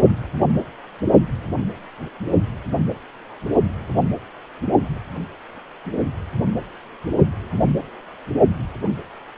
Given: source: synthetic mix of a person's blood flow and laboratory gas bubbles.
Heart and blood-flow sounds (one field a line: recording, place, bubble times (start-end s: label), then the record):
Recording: Doppler ultrasound of blood flow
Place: precordium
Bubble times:
no bubbles
From the record:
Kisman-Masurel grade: 000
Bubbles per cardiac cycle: 0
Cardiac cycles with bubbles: 0%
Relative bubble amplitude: no bubbles discernible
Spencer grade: 0 (complete lack of bubble signals)